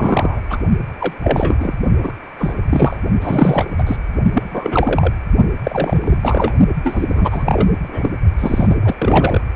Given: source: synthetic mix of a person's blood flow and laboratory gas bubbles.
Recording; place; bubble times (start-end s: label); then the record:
Doppler ultrasound of blood flow; precordium
0.00-0.41 s: bubbles
0.49-0.58 s: bubbles
1.00-1.14 s: bubbles
1.23-1.56 s: bubbles
1.60-1.75 s: bubbles
2.02-2.12 s: bubbles
2.38-2.54 s: bubbles
2.69-2.98 s: bubbles
3.21-3.73 s: bubbles
3.78-3.84 s: bubbles
3.86-3.97 s: bubbles
4.33-5.13 s: bubbles
5.63-6.18 s: bubbles
6.21-6.54 s: bubbles
6.83-7.69 s: bubbles
7.83-8.10 s: bubbles
8.38-8.67 s: bubbles
8.70-8.76 s: bubbles
8.81-8.96 s: bubbles
8.98-9.41 s: bubbles
From the record:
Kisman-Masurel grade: 343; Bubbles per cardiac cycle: rolling drumbeat, 9 or more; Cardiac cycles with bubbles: 100%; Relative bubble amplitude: loud (0.450 to 0.775); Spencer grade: 3 (all of the cardiac periods contain showers or single bubble signals, but not dominating or overriding the cardiac motion signals); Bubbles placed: only in the low amplitude regions of the cardiac cycle